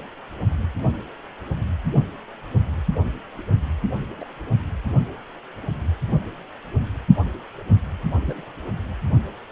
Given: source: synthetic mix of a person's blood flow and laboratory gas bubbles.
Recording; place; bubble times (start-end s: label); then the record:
Doppler ultrasound of blood flow; precordium
4.18-4.24 s: bubbles
8.23-8.45 s: bubbles
From the record:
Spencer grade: 2 (many but less than half of the cardiac periods contain bubble signals, singularly or in groups); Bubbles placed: only in the low amplitude regions of the cardiac cycle